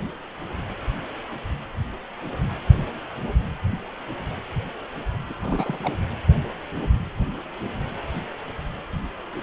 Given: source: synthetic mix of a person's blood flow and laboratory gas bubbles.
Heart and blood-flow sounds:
Doppler ultrasound of blood flow; precordium
5.29-5.33 s: bubbles
5.42-5.94 s: bubbles
From the record:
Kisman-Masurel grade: 211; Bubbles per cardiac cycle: several, 3 to 8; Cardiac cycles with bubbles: 1 to 10%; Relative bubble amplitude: barely perceptible (0.100 to 0.250); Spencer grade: 1 (occasional bubble signal discernible with the cardiac motion signal, with majority of cardiac periods free of bubbles); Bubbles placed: anywhere in the cardiac cycle

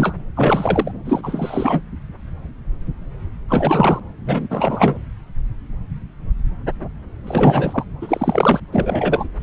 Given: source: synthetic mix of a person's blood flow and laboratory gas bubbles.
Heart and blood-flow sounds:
Doppler ultrasound of blood flow; subclavian vein
0.00-0.15 s: bubbles
0.35-0.92 s: bubbles
1.05-1.83 s: bubbles
3.48-4.00 s: bubbles
4.25-4.47 s: bubbles
4.50-4.97 s: bubbles
7.27-7.84 s: bubbles
8.02-8.60 s: bubbles
8.72-9.28 s: bubbles
From the record:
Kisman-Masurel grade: 333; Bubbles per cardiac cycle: rolling drumbeat, 9 or more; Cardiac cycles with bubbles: 50 to 99%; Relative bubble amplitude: loud (0.450 to 0.775); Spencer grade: 3 (all of the cardiac periods contain showers or single bubble signals, but not dominating or overriding the cardiac motion signals); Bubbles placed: anywhere in the cardiac cycle

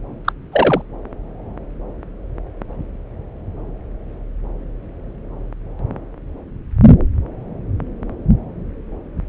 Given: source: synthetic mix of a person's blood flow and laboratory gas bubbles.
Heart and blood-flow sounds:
Doppler ultrasound of blood flow; subclavian vein
0.25-0.33 s: bubbles
0.52-0.82 s: bubbles
From the record:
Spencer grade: 1 (occasional bubble signal discernible with the cardiac motion signal, with majority of cardiac periods free of bubbles); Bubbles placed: anywhere in the cardiac cycle

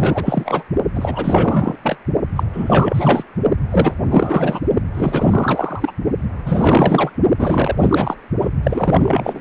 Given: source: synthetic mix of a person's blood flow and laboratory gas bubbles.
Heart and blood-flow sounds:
Doppler ultrasound of blood flow; precordium
0.00-0.64 s: bubbles
0.94-1.76 s: bubbles
1.83-1.98 s: bubbles
2.35-2.44 s: bubbles
2.53-3.23 s: bubbles
3.71-3.97 s: bubbles
4.08-4.61 s: bubbles
4.94-5.92 s: bubbles
6.45-7.11 s: bubbles
7.37-8.16 s: bubbles
8.41-8.50 s: bubbles
8.63-9.41 s: bubbles
From the record:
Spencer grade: 4 (maximum detectable bubble signal sounding continuously throughout systole and diastole of every cardiac period, and overriding the amplitude of the normal cardiac signals); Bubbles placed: only in the low amplitude regions of the cardiac cycle

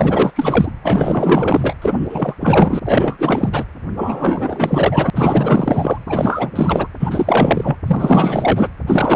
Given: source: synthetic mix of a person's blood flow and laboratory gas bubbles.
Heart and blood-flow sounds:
Doppler ultrasound of blood flow; precordium
0.00-0.33 s: bubbles
0.36-0.72 s: bubbles
0.83-1.74 s: bubbles
1.81-2.35 s: bubbles
2.40-2.79 s: bubbles
2.85-3.49 s: bubbles
3.52-3.64 s: bubbles
3.96-5.10 s: bubbles
5.15-5.98 s: bubbles
6.06-6.88 s: bubbles
7.00-7.77 s: bubbles
7.86-8.70 s: bubbles
8.87-9.16 s: bubbles
From the record:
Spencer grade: 4 (maximum detectable bubble signal sounding continuously throughout systole and diastole of every cardiac period, and overriding the amplitude of the normal cardiac signals); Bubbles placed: anywhere in the cardiac cycle

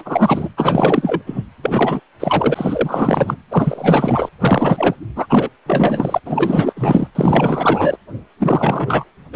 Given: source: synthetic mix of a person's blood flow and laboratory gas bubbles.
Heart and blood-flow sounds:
Doppler ultrasound of blood flow; precordium
0.00-0.48 s: bubbles
0.57-1.22 s: bubbles
1.26-1.43 s: bubbles
1.62-2.00 s: bubbles
2.19-3.37 s: bubbles
3.50-4.29 s: bubbles
4.41-4.94 s: bubbles
5.16-5.26 s: bubbles
5.29-5.50 s: bubbles
5.66-6.20 s: bubbles
6.25-6.74 s: bubbles
6.76-7.08 s: bubbles
7.15-7.97 s: bubbles
8.39-9.04 s: bubbles
9.32-9.36 s: bubbles
From the record:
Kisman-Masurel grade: 444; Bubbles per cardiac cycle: continuous sound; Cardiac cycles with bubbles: 100%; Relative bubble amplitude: maximal (0.775 to 0.999); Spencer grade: 4 (maximum detectable bubble signal sounding continuously throughout systole and diastole of every cardiac period, and overriding the amplitude of the normal cardiac signals); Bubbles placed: anywhere in the cardiac cycle

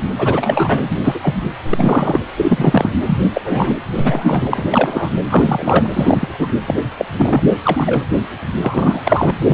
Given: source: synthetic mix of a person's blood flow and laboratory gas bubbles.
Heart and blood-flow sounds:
Doppler ultrasound of blood flow; precordium
0.17-0.93 s: bubbles
1.04-1.34 s: bubbles
1.70-2.21 s: bubbles
2.36-2.90 s: bubbles
3.06-3.30 s: bubbles
3.33-3.41 s: bubbles
3.45-3.75 s: bubbles
3.96-4.64 s: bubbles
4.71-5.15 s: bubbles
5.28-5.87 s: bubbles
5.93-6.29 s: bubbles
6.39-6.49 s: bubbles
6.66-6.75 s: bubbles
6.97-7.05 s: bubbles
7.17-7.46 s: bubbles
7.65-8.04 s: bubbles
8.56-9.02 s: bubbles
9.05-9.31 s: bubbles
9.38-9.54 s: bubbles
From the record:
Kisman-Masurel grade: 243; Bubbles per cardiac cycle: several, 3 to 8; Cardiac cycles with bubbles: 100%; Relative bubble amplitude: loud (0.450 to 0.775); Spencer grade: 3 (all of the cardiac periods contain showers or single bubble signals, but not dominating or overriding the cardiac motion signals); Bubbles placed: anywhere in the cardiac cycle

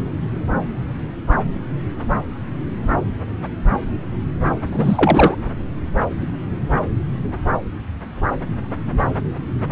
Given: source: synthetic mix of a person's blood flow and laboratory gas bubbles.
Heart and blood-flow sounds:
Doppler ultrasound of blood flow; subclavian vein
4.71-5.34 s: bubbles
From the record:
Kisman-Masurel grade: 213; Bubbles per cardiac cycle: several, 3 to 8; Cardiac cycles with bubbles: 1 to 10%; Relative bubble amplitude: loud (0.450 to 0.775); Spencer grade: 1 (occasional bubble signal discernible with the cardiac motion signal, with majority of cardiac periods free of bubbles); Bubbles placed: anywhere in the cardiac cycle

